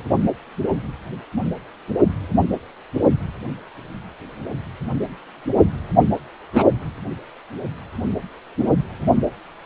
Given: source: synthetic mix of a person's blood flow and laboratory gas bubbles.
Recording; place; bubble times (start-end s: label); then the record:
Doppler ultrasound of blood flow; precordium
6.53-6.65 s: bubbles
From the record:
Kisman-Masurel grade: 112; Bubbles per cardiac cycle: 1 to 2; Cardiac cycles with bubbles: 1 to 10%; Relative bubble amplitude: moderate (0.250 to 0.450); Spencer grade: 1 (occasional bubble signal discernible with the cardiac motion signal, with majority of cardiac periods free of bubbles); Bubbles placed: anywhere in the cardiac cycle